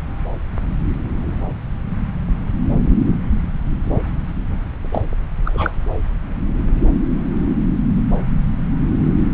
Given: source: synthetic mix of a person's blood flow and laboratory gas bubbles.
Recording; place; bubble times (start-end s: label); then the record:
Doppler ultrasound of blood flow; subclavian vein
4.92-5.01 s: bubbles
5.45-5.79 s: bubbles
From the record:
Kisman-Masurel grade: 122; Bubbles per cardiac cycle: 1 to 2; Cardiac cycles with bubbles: 10 to 50%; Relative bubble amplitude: moderate (0.250 to 0.450); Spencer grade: 2 (many but less than half of the cardiac periods contain bubble signals, singularly or in groups); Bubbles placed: anywhere in the cardiac cycle